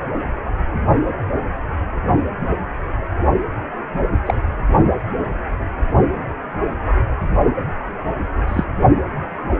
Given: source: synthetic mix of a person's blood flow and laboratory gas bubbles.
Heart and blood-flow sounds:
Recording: Doppler ultrasound of blood flow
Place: precordium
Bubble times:
4.25-4.34 s: bubbles
8.47-8.64 s: bubbles
From the record:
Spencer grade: 2 (many but less than half of the cardiac periods contain bubble signals, singularly or in groups)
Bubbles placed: only in the low amplitude regions of the cardiac cycle

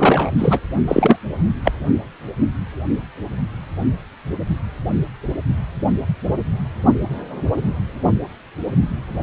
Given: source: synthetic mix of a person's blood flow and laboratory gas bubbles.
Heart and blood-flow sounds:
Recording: Doppler ultrasound of blood flow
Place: precordium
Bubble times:
0.00-0.31 s: bubbles
0.38-0.59 s: bubbles
0.88-1.17 s: bubbles
1.64-1.72 s: bubbles
From the record:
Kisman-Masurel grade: 223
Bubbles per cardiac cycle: several, 3 to 8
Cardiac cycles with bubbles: 10 to 50%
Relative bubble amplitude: loud (0.450 to 0.775)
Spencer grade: 2 (many but less than half of the cardiac periods contain bubble signals, singularly or in groups)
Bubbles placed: only in the low amplitude regions of the cardiac cycle

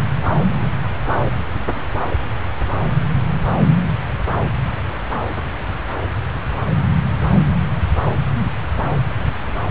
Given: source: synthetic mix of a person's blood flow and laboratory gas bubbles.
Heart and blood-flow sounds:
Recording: Doppler ultrasound of blood flow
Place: subclavian vein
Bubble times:
no bubbles
From the record:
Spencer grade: 0 (complete lack of bubble signals)

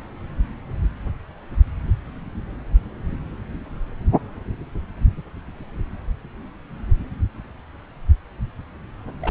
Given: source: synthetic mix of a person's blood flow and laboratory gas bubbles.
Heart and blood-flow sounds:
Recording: Doppler ultrasound of blood flow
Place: subclavian vein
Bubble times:
9.20-9.31 s: bubbles
From the record:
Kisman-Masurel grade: 212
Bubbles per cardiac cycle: several, 3 to 8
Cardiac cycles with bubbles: 1 to 10%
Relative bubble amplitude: moderate (0.250 to 0.450)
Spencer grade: 1 (occasional bubble signal discernible with the cardiac motion signal, with majority of cardiac periods free of bubbles)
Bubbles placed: anywhere in the cardiac cycle

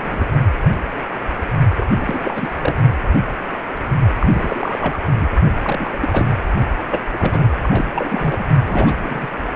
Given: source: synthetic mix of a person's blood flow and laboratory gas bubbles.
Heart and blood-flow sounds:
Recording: Doppler ultrasound of blood flow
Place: precordium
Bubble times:
0.00-0.26 s: bubbles
1.76-1.89 s: bubbles
1.96-2.53 s: bubbles
2.60-2.76 s: bubbles
4.19-5.03 s: bubbles
5.19-5.27 s: bubbles
5.63-5.97 s: bubbles
6.00-6.30 s: bubbles
6.91-7.01 s: bubbles
7.12-7.50 s: bubbles
7.62-8.45 s: bubbles
8.64-9.28 s: bubbles
From the record:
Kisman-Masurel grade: 332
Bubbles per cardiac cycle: rolling drumbeat, 9 or more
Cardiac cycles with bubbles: 50 to 99%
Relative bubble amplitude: moderate (0.250 to 0.450)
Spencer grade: 3 (all of the cardiac periods contain showers or single bubble signals, but not dominating or overriding the cardiac motion signals)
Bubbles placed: only in the low amplitude regions of the cardiac cycle

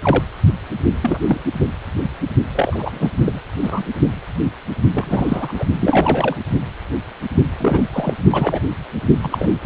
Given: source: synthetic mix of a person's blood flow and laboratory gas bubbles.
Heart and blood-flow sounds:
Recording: Doppler ultrasound of blood flow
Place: precordium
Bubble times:
0.02-0.24 s: bubbles
1.01-1.19 s: bubbles
1.28-1.41 s: bubbles
2.55-3.10 s: bubbles
3.25-3.41 s: bubbles
3.62-3.84 s: bubbles
4.91-5.64 s: bubbles
5.81-6.37 s: bubbles
7.58-7.89 s: bubbles
7.92-8.13 s: bubbles
8.30-8.62 s: bubbles
9.21-9.56 s: bubbles
9.62-9.66 s: bubbles
From the record:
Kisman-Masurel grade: 232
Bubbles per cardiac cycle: several, 3 to 8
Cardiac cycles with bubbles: 50 to 99%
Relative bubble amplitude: moderate (0.250 to 0.450)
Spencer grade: 3 (all of the cardiac periods contain showers or single bubble signals, but not dominating or overriding the cardiac motion signals)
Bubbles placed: only in the low amplitude regions of the cardiac cycle

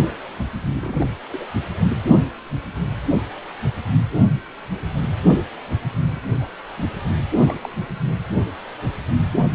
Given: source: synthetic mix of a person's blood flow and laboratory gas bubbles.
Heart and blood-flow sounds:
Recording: Doppler ultrasound of blood flow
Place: precordium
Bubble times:
0.00-0.11 s: bubbles
0.71-1.06 s: bubbles
1.31-1.47 s: bubbles
6.07-6.20 s: bubbles
6.41-6.47 s: bubbles
6.78-6.86 s: bubbles
7.32-7.37 s: bubbles
7.45-7.54 s: bubbles
7.64-7.69 s: bubbles
From the record:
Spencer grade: 2 (many but less than half of the cardiac periods contain bubble signals, singularly or in groups)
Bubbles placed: anywhere in the cardiac cycle

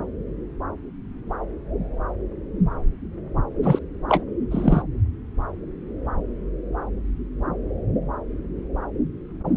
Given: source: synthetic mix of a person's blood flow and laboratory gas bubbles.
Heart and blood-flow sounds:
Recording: Doppler ultrasound of blood flow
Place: subclavian vein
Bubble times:
3.62-3.79 s: bubbles
4.08-4.23 s: bubbles
4.51-4.82 s: bubbles
From the record:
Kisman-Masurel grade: 212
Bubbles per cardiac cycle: several, 3 to 8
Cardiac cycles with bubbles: 1 to 10%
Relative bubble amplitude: moderate (0.250 to 0.450)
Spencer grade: 1 (occasional bubble signal discernible with the cardiac motion signal, with majority of cardiac periods free of bubbles)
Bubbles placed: anywhere in the cardiac cycle

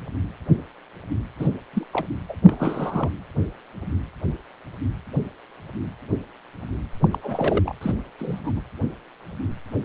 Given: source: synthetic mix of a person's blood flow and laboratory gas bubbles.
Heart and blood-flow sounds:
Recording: Doppler ultrasound of blood flow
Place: precordium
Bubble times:
1.39-1.48 s: bubbles
1.73-1.84 s: bubbles
1.93-2.07 s: bubbles
2.29-2.36 s: bubbles
2.45-3.10 s: bubbles
7.02-7.08 s: bubbles
7.12-7.19 s: bubbles
7.23-7.74 s: bubbles
7.81-7.95 s: bubbles
8.19-8.39 s: bubbles
8.44-8.52 s: bubbles
8.55-8.61 s: bubbles
From the record:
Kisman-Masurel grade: 221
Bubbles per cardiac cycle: several, 3 to 8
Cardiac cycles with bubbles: 10 to 50%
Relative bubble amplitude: barely perceptible (0.100 to 0.250)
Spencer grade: 2 (many but less than half of the cardiac periods contain bubble signals, singularly or in groups)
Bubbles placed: anywhere in the cardiac cycle

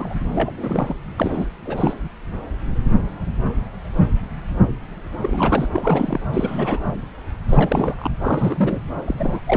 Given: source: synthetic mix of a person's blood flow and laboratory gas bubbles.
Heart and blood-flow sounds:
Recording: Doppler ultrasound of blood flow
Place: subclavian vein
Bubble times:
0.00-0.14 s: bubbles
0.29-0.94 s: bubbles
1.18-1.47 s: bubbles
1.65-1.94 s: bubbles
5.22-5.68 s: bubbles
5.73-6.21 s: bubbles
6.32-6.80 s: bubbles
7.49-7.95 s: bubbles
7.98-8.11 s: bubbles
8.21-8.79 s: bubbles
9.04-9.40 s: bubbles
9.46-9.57 s: bubbles
From the record:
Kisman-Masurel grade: 332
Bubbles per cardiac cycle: rolling drumbeat, 9 or more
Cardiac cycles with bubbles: 50 to 99%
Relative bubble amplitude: moderate (0.250 to 0.450)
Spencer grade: 3 (all of the cardiac periods contain showers or single bubble signals, but not dominating or overriding the cardiac motion signals)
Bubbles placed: anywhere in the cardiac cycle

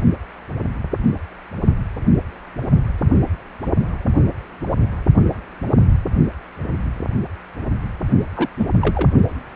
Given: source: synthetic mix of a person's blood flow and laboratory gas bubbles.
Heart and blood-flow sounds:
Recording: Doppler ultrasound of blood flow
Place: precordium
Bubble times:
8.37-8.49 s: bubbles
8.58-8.66 s: bubbles
8.81-9.10 s: bubbles
From the record:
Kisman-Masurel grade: 222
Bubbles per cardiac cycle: several, 3 to 8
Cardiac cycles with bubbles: 10 to 50%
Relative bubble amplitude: moderate (0.250 to 0.450)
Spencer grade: 2 (many but less than half of the cardiac periods contain bubble signals, singularly or in groups)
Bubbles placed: only in the low amplitude regions of the cardiac cycle

